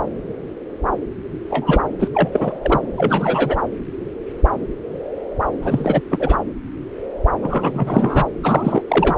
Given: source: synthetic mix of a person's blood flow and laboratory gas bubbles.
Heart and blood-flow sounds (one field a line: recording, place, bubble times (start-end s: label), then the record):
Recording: Doppler ultrasound of blood flow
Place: subclavian vein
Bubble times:
1.50-1.82 s: bubbles
1.99-2.08 s: bubbles
2.13-2.29 s: bubbles
2.32-2.58 s: bubbles
2.63-2.79 s: bubbles
2.97-3.63 s: bubbles
5.62-6.01 s: bubbles
6.10-6.36 s: bubbles
7.42-8.25 s: bubbles
8.43-8.82 s: bubbles
8.88-9.15 s: bubbles
From the record:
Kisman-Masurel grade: 233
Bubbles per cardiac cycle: several, 3 to 8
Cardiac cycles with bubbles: 50 to 99%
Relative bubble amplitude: loud (0.450 to 0.775)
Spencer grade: 3 (all of the cardiac periods contain showers or single bubble signals, but not dominating or overriding the cardiac motion signals)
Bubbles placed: anywhere in the cardiac cycle